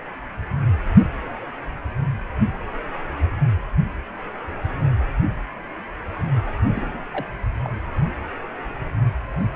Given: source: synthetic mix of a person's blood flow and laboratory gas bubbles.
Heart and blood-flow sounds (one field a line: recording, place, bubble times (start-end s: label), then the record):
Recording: Doppler ultrasound of blood flow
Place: precordium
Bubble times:
6.73-7.03 s: bubbles
7.12-7.26 s: bubbles
7.65-7.70 s: bubbles
From the record:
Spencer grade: 1 (occasional bubble signal discernible with the cardiac motion signal, with majority of cardiac periods free of bubbles)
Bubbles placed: anywhere in the cardiac cycle